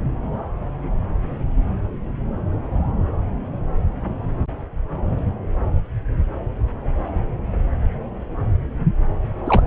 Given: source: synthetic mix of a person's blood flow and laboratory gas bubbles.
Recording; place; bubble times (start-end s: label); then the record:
Doppler ultrasound of blood flow; subclavian vein
9.46-9.62 s: bubbles
From the record:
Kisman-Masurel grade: 123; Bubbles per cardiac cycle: 1 to 2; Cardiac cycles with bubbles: 10 to 50%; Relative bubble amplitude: loud (0.450 to 0.775); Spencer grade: 2 (many but less than half of the cardiac periods contain bubble signals, singularly or in groups); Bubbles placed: anywhere in the cardiac cycle